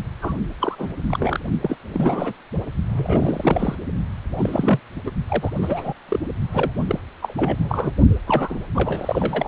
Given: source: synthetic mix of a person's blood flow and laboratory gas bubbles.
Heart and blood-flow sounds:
Doppler ultrasound of blood flow; precordium
0.21-0.37 s: bubbles
0.60-0.75 s: bubbles
0.78-0.94 s: bubbles
1.08-1.40 s: bubbles
1.62-1.77 s: bubbles
1.94-2.33 s: bubbles
2.92-3.76 s: bubbles
4.36-4.79 s: bubbles
5.05-5.10 s: bubbles
5.26-5.93 s: bubbles
6.08-6.19 s: bubbles
6.52-6.71 s: bubbles
6.88-6.99 s: bubbles
7.22-7.93 s: bubbles
8.27-8.60 s: bubbles
8.75-9.48 s: bubbles
From the record:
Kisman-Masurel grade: 342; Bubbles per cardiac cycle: rolling drumbeat, 9 or more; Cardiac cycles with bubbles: 100%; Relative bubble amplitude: moderate (0.250 to 0.450); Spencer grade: 3 (all of the cardiac periods contain showers or single bubble signals, but not dominating or overriding the cardiac motion signals); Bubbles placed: only in the low amplitude regions of the cardiac cycle

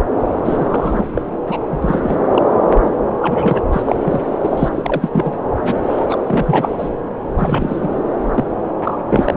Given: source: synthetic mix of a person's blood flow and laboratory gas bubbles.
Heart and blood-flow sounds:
Doppler ultrasound of blood flow; subclavian vein
0.42-1.07 s: bubbles
1.15-1.22 s: bubbles
1.46-1.66 s: bubbles
1.69-2.17 s: bubbles
2.31-2.42 s: bubbles
2.84-2.91 s: bubbles
3.21-3.66 s: bubbles
3.72-3.82 s: bubbles
3.85-4.25 s: bubbles
4.41-4.69 s: bubbles
4.75-5.10 s: bubbles
5.12-5.42 s: bubbles
5.65-5.75 s: bubbles
5.87-6.16 s: bubbles
6.27-6.89 s: bubbles
7.38-7.88 s: bubbles
8.34-8.44 s: bubbles
8.83-8.97 s: bubbles
9.10-9.34 s: bubbles
From the record:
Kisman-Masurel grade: 343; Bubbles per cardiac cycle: rolling drumbeat, 9 or more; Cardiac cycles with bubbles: 100%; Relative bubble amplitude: loud (0.450 to 0.775); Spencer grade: 3 (all of the cardiac periods contain showers or single bubble signals, but not dominating or overriding the cardiac motion signals); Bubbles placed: anywhere in the cardiac cycle

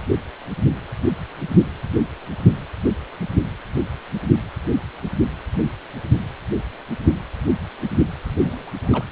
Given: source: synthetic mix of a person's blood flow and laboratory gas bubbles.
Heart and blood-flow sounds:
Doppler ultrasound of blood flow; precordium
8.40-8.70 s: bubbles
8.83-9.04 s: bubbles
From the record:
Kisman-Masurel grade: 221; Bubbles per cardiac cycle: several, 3 to 8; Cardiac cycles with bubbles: 10 to 50%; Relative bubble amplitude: barely perceptible (0.100 to 0.250); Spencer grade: 2 (many but less than half of the cardiac periods contain bubble signals, singularly or in groups); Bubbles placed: anywhere in the cardiac cycle

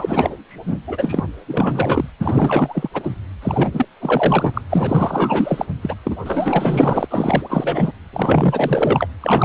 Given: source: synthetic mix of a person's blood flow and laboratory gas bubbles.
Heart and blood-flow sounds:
Doppler ultrasound of blood flow; precordium
0.00-0.36 s: bubbles
0.48-0.78 s: bubbles
0.87-1.24 s: bubbles
1.46-2.10 s: bubbles
2.20-2.88 s: bubbles
2.94-3.15 s: bubbles
3.42-3.86 s: bubbles
4.00-4.62 s: bubbles
4.69-5.66 s: bubbles
5.82-5.96 s: bubbles
6.03-6.16 s: bubbles
6.25-7.08 s: bubbles
7.10-7.92 s: bubbles
8.12-9.08 s: bubbles
9.21-9.45 s: bubbles
From the record:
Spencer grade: 4 (maximum detectable bubble signal sounding continuously throughout systole and diastole of every cardiac period, and overriding the amplitude of the normal cardiac signals); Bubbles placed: anywhere in the cardiac cycle

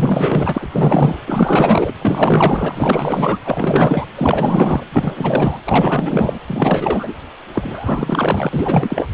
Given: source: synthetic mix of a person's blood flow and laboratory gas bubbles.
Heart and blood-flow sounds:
Doppler ultrasound of blood flow; precordium
0.00-0.69 s: bubbles
0.72-1.21 s: bubbles
1.27-1.92 s: bubbles
2.01-3.39 s: bubbles
3.44-4.07 s: bubbles
4.16-4.84 s: bubbles
4.92-5.59 s: bubbles
5.65-6.38 s: bubbles
6.46-7.15 s: bubbles
7.53-9.08 s: bubbles
From the record:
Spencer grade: 4 (maximum detectable bubble signal sounding continuously throughout systole and diastole of every cardiac period, and overriding the amplitude of the normal cardiac signals); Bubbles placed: anywhere in the cardiac cycle

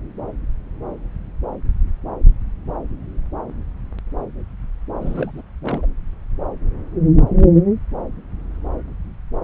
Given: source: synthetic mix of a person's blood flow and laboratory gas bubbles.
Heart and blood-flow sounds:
Doppler ultrasound of blood flow; subclavian vein
5.00-5.42 s: bubbles
5.62-5.86 s: bubbles
From the record:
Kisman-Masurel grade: 211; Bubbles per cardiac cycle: several, 3 to 8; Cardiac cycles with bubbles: 1 to 10%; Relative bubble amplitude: barely perceptible (0.100 to 0.250); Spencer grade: 1 (occasional bubble signal discernible with the cardiac motion signal, with majority of cardiac periods free of bubbles); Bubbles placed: anywhere in the cardiac cycle

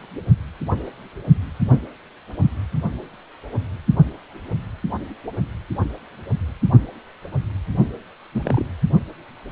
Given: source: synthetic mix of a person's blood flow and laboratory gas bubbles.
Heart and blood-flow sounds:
Doppler ultrasound of blood flow; precordium
8.31-8.66 s: bubbles
From the record:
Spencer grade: 1 (occasional bubble signal discernible with the cardiac motion signal, with majority of cardiac periods free of bubbles); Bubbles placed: anywhere in the cardiac cycle

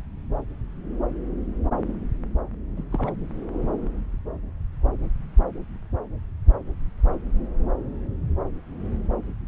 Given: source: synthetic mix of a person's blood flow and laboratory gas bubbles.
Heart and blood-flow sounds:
Doppler ultrasound of blood flow; subclavian vein
2.77-2.84 s: bubbles
2.92-3.13 s: bubbles
From the record:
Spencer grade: 1 (occasional bubble signal discernible with the cardiac motion signal, with majority of cardiac periods free of bubbles); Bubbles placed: anywhere in the cardiac cycle

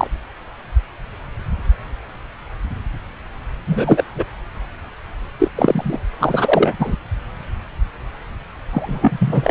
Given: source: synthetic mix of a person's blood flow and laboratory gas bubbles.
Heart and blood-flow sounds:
Doppler ultrasound of blood flow; subclavian vein
0.00-0.07 s: bubbles
3.67-4.04 s: bubbles
4.15-4.24 s: bubbles
5.38-5.49 s: bubbles
5.56-6.00 s: bubbles
6.19-6.75 s: bubbles
6.79-6.97 s: bubbles
8.71-9.51 s: bubbles
From the record:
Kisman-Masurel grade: 223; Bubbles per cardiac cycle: several, 3 to 8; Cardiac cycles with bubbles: 10 to 50%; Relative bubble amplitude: loud (0.450 to 0.775); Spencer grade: 2 (many but less than half of the cardiac periods contain bubble signals, singularly or in groups); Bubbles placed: anywhere in the cardiac cycle

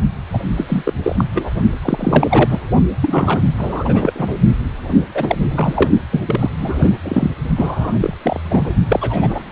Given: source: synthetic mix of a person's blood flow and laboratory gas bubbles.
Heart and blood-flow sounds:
Doppler ultrasound of blood flow; precordium
0.33-0.39 s: bubbles
0.57-0.93 s: bubbles
1.03-1.25 s: bubbles
1.34-1.50 s: bubbles
1.82-2.59 s: bubbles
3.02-3.42 s: bubbles
3.57-4.35 s: bubbles
5.14-5.38 s: bubbles
5.40-5.91 s: bubbles
6.12-6.21 s: bubbles
6.25-6.50 s: bubbles
6.58-6.98 s: bubbles
7.02-7.30 s: bubbles
7.57-8.14 s: bubbles
8.22-8.40 s: bubbles
8.45-8.74 s: bubbles
8.88-9.43 s: bubbles
9.49-9.52 s: bubbles
From the record:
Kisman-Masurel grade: 343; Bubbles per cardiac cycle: rolling drumbeat, 9 or more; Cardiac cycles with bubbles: 100%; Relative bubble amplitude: loud (0.450 to 0.775); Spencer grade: 3 (all of the cardiac periods contain showers or single bubble signals, but not dominating or overriding the cardiac motion signals); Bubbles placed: only in the low amplitude regions of the cardiac cycle

